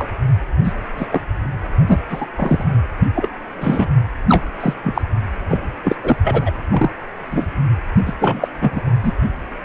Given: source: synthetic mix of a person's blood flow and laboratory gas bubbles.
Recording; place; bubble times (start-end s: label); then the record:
Doppler ultrasound of blood flow; precordium
0.00-0.07 s: bubbles
0.64-0.75 s: bubbles
0.97-1.07 s: bubbles
1.10-1.21 s: bubbles
1.89-1.98 s: bubbles
2.08-2.27 s: bubbles
2.37-2.63 s: bubbles
3.15-3.29 s: bubbles
3.56-3.88 s: bubbles
4.29-4.45 s: bubbles
4.60-4.74 s: bubbles
4.84-5.02 s: bubbles
5.49-5.59 s: bubbles
5.84-5.96 s: bubbles
6.03-6.17 s: bubbles
6.24-6.51 s: bubbles
6.70-6.91 s: bubbles
7.31-7.47 s: bubbles
8.05-8.14 s: bubbles
8.21-8.48 s: bubbles
8.61-8.80 s: bubbles
9.04-9.13 s: bubbles
From the record:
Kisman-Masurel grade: 243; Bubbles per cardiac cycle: several, 3 to 8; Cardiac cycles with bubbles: 100%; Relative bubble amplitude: loud (0.450 to 0.775); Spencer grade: 3 (all of the cardiac periods contain showers or single bubble signals, but not dominating or overriding the cardiac motion signals); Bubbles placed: anywhere in the cardiac cycle